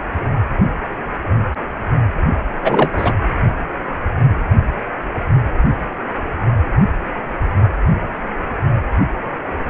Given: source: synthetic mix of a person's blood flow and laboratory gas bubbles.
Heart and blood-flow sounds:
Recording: Doppler ultrasound of blood flow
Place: precordium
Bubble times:
2.64-2.91 s: bubbles
2.97-3.14 s: bubbles
From the record:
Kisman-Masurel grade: 213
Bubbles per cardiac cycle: several, 3 to 8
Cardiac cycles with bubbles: 1 to 10%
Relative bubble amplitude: loud (0.450 to 0.775)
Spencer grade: 1 (occasional bubble signal discernible with the cardiac motion signal, with majority of cardiac periods free of bubbles)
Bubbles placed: only in the low amplitude regions of the cardiac cycle

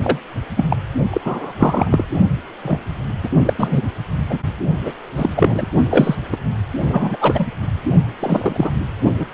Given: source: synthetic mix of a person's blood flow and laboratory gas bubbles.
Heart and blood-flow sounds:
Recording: Doppler ultrasound of blood flow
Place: precordium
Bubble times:
0.02-0.18 s: bubbles
0.56-0.66 s: bubbles
0.69-0.77 s: bubbles
1.10-1.21 s: bubbles
1.25-1.53 s: bubbles
1.58-2.05 s: bubbles
2.63-2.77 s: bubbles
3.23-3.29 s: bubbles
3.45-3.54 s: bubbles
3.58-3.82 s: bubbles
4.29-4.39 s: bubbles
4.85-4.92 s: bubbles
5.16-5.33 s: bubbles
5.37-5.67 s: bubbles
5.91-6.15 s: bubbles
6.32-6.37 s: bubbles
6.82-7.17 s: bubbles
7.20-7.47 s: bubbles
8.19-8.70 s: bubbles
9.19-9.26 s: bubbles
From the record:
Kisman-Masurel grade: 243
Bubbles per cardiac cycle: several, 3 to 8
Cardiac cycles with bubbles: 100%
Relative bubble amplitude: loud (0.450 to 0.775)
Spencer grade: 3 (all of the cardiac periods contain showers or single bubble signals, but not dominating or overriding the cardiac motion signals)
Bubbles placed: only in the low amplitude regions of the cardiac cycle

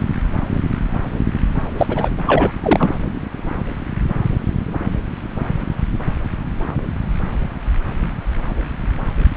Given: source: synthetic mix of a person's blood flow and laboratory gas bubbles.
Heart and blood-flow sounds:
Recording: Doppler ultrasound of blood flow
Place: subclavian vein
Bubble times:
1.78-2.09 s: bubbles
2.26-2.51 s: bubbles
2.62-2.94 s: bubbles
From the record:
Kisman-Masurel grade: 213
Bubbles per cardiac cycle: several, 3 to 8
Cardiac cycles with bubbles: 1 to 10%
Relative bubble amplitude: loud (0.450 to 0.775)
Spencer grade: 1 (occasional bubble signal discernible with the cardiac motion signal, with majority of cardiac periods free of bubbles)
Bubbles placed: anywhere in the cardiac cycle

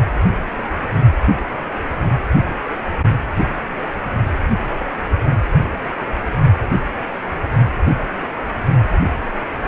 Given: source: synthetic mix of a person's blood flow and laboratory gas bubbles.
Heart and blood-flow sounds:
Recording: Doppler ultrasound of blood flow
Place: precordium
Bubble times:
4.78-4.86 s: bubbles
From the record:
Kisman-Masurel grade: 111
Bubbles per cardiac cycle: 1 to 2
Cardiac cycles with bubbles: 1 to 10%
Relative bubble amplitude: barely perceptible (0.100 to 0.250)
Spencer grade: 1 (occasional bubble signal discernible with the cardiac motion signal, with majority of cardiac periods free of bubbles)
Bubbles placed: anywhere in the cardiac cycle

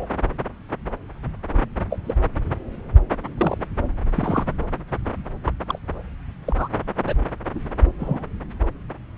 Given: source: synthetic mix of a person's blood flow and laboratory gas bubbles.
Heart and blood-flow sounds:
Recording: Doppler ultrasound of blood flow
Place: subclavian vein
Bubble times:
0.00-0.06 s: bubbles
1.90-2.00 s: bubbles
2.06-2.14 s: bubbles
3.37-3.64 s: bubbles
4.15-4.44 s: bubbles
5.46-5.52 s: bubbles
5.67-5.79 s: bubbles
6.45-6.68 s: bubbles
7.07-7.14 s: bubbles
7.55-7.60 s: bubbles
7.99-8.25 s: bubbles
From the record:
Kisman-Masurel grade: 122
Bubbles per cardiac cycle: 1 to 2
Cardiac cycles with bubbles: 10 to 50%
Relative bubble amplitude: moderate (0.250 to 0.450)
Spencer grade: 2 (many but less than half of the cardiac periods contain bubble signals, singularly or in groups)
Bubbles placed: anywhere in the cardiac cycle

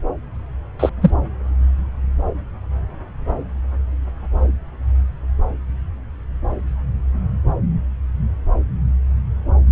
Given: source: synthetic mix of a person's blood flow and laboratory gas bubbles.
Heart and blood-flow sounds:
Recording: Doppler ultrasound of blood flow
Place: subclavian vein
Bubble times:
0.79-0.89 s: bubbles
1.01-1.11 s: bubbles
From the record:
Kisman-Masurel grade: 113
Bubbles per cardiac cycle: 1 to 2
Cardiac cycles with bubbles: 1 to 10%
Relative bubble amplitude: loud (0.450 to 0.775)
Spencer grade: 1 (occasional bubble signal discernible with the cardiac motion signal, with majority of cardiac periods free of bubbles)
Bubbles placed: anywhere in the cardiac cycle

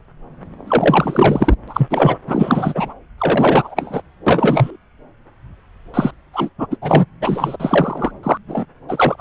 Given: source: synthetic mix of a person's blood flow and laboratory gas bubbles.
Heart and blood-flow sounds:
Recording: Doppler ultrasound of blood flow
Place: subclavian vein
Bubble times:
0.67-1.54 s: bubbles
1.67-2.17 s: bubbles
2.27-2.94 s: bubbles
3.18-4.01 s: bubbles
4.26-4.76 s: bubbles
5.93-6.11 s: bubbles
6.33-6.50 s: bubbles
6.58-6.67 s: bubbles
6.71-6.76 s: bubbles
6.81-7.05 s: bubbles
7.21-7.56 s: bubbles
7.59-8.12 s: bubbles
8.23-8.38 s: bubbles
8.48-8.64 s: bubbles
8.88-9.21 s: bubbles
From the record:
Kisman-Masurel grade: 333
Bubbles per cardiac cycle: rolling drumbeat, 9 or more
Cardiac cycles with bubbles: 50 to 99%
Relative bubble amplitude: loud (0.450 to 0.775)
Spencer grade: 3 (all of the cardiac periods contain showers or single bubble signals, but not dominating or overriding the cardiac motion signals)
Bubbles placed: anywhere in the cardiac cycle

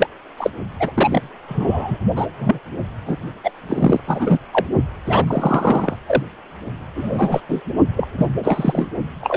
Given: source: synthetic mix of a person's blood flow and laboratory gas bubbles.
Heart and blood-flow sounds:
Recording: Doppler ultrasound of blood flow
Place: precordium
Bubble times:
0.00-0.07 s: bubbles
0.37-0.50 s: bubbles
0.79-0.92 s: bubbles
0.95-1.29 s: bubbles
1.47-1.98 s: bubbles
2.15-2.27 s: bubbles
2.36-2.59 s: bubbles
3.05-3.18 s: bubbles
3.44-3.50 s: bubbles
3.69-4.00 s: bubbles
4.07-4.39 s: bubbles
4.52-4.66 s: bubbles
5.06-5.96 s: bubbles
6.07-6.24 s: bubbles
6.95-7.41 s: bubbles
7.49-7.61 s: bubbles
7.97-8.07 s: bubbles
8.18-8.26 s: bubbles
8.43-8.88 s: bubbles
9.21-9.37 s: bubbles
From the record:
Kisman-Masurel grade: 243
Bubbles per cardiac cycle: several, 3 to 8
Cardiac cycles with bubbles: 100%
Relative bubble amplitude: loud (0.450 to 0.775)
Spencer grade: 3 (all of the cardiac periods contain showers or single bubble signals, but not dominating or overriding the cardiac motion signals)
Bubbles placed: only in the low amplitude regions of the cardiac cycle

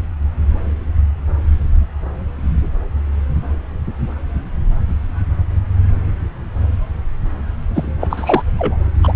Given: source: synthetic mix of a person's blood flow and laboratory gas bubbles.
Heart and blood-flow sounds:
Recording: Doppler ultrasound of blood flow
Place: subclavian vein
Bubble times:
7.74-7.92 s: bubbles
8.00-8.42 s: bubbles
8.58-8.77 s: bubbles
9.03-9.13 s: bubbles
From the record:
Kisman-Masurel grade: 223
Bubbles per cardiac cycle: several, 3 to 8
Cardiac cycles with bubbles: 10 to 50%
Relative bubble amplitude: loud (0.450 to 0.775)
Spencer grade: 2 (many but less than half of the cardiac periods contain bubble signals, singularly or in groups)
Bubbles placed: anywhere in the cardiac cycle

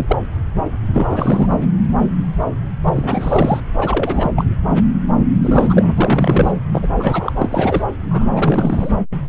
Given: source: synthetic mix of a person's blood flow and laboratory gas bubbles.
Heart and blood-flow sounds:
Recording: Doppler ultrasound of blood flow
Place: subclavian vein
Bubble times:
0.00-0.17 s: bubbles
0.94-1.58 s: bubbles
2.84-3.61 s: bubbles
3.77-4.32 s: bubbles
4.36-4.45 s: bubbles
5.41-6.53 s: bubbles
6.72-6.87 s: bubbles
6.96-7.33 s: bubbles
7.37-7.83 s: bubbles
8.10-8.29 s: bubbles
8.34-8.91 s: bubbles
From the record:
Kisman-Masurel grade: 332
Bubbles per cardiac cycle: rolling drumbeat, 9 or more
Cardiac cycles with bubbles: 50 to 99%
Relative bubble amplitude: moderate (0.250 to 0.450)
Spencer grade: 3 (all of the cardiac periods contain showers or single bubble signals, but not dominating or overriding the cardiac motion signals)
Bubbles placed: anywhere in the cardiac cycle

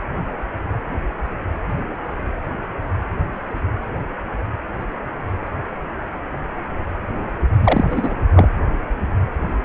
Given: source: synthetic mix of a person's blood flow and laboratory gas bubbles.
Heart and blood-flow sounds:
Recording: Doppler ultrasound of blood flow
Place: precordium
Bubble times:
7.59-8.14 s: bubbles
8.34-8.49 s: bubbles
From the record:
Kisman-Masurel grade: 213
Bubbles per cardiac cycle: several, 3 to 8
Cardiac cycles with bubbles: 1 to 10%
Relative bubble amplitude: loud (0.450 to 0.775)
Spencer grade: 1 (occasional bubble signal discernible with the cardiac motion signal, with majority of cardiac periods free of bubbles)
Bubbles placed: anywhere in the cardiac cycle

